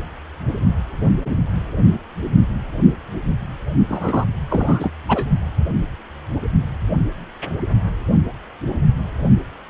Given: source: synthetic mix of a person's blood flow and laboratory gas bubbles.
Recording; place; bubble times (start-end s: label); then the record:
Doppler ultrasound of blood flow; precordium
3.89-4.25 s: bubbles
4.50-4.91 s: bubbles
5.08-5.25 s: bubbles
From the record:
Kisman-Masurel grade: 213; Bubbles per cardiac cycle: several, 3 to 8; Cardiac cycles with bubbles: 1 to 10%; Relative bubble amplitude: loud (0.450 to 0.775); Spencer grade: 1 (occasional bubble signal discernible with the cardiac motion signal, with majority of cardiac periods free of bubbles); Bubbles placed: only in the low amplitude regions of the cardiac cycle